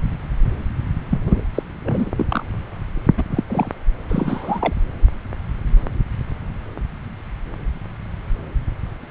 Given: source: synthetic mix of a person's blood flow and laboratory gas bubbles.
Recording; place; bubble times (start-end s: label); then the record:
Doppler ultrasound of blood flow; subclavian vein
1.10-1.19 s: bubbles
1.26-1.41 s: bubbles
1.54-1.62 s: bubbles
1.84-2.11 s: bubbles
2.17-2.26 s: bubbles
2.29-2.44 s: bubbles
3.17-3.24 s: bubbles
3.31-3.44 s: bubbles
3.50-3.71 s: bubbles
4.09-4.74 s: bubbles
From the record:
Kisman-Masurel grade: 222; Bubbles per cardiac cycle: several, 3 to 8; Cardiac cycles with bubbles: 10 to 50%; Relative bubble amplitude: moderate (0.250 to 0.450); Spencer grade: 2 (many but less than half of the cardiac periods contain bubble signals, singularly or in groups); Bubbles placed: anywhere in the cardiac cycle